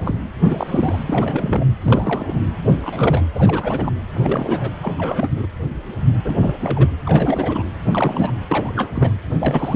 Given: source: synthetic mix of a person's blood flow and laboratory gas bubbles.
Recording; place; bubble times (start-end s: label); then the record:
Doppler ultrasound of blood flow; precordium
0.00-0.19 s: bubbles
0.34-1.03 s: bubbles
1.07-1.72 s: bubbles
1.81-2.40 s: bubbles
2.67-2.77 s: bubbles
2.82-3.23 s: bubbles
3.33-3.92 s: bubbles
4.13-4.71 s: bubbles
4.83-4.93 s: bubbles
4.98-5.29 s: bubbles
5.36-5.46 s: bubbles
6.25-6.36 s: bubbles
6.42-6.55 s: bubbles
6.60-6.90 s: bubbles
7.05-7.64 s: bubbles
7.76-8.31 s: bubbles
8.48-8.88 s: bubbles
8.92-9.13 s: bubbles
9.29-9.76 s: bubbles
From the record:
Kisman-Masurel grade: 332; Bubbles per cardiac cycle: rolling drumbeat, 9 or more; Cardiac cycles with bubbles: 50 to 99%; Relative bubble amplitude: moderate (0.250 to 0.450); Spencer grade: 3 (all of the cardiac periods contain showers or single bubble signals, but not dominating or overriding the cardiac motion signals); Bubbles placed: anywhere in the cardiac cycle